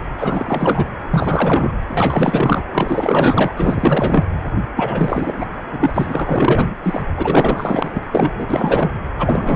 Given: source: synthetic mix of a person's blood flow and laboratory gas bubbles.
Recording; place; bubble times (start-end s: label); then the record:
Doppler ultrasound of blood flow; precordium
0.17-0.90 s: bubbles
1.10-1.72 s: bubbles
1.89-2.63 s: bubbles
2.72-3.53 s: bubbles
3.57-4.25 s: bubbles
4.75-5.48 s: bubbles
5.71-5.91 s: bubbles
5.93-6.75 s: bubbles
6.83-7.02 s: bubbles
7.17-8.01 s: bubbles
8.11-8.32 s: bubbles
8.40-8.91 s: bubbles
9.19-9.56 s: bubbles
From the record:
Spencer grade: 4 (maximum detectable bubble signal sounding continuously throughout systole and diastole of every cardiac period, and overriding the amplitude of the normal cardiac signals); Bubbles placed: anywhere in the cardiac cycle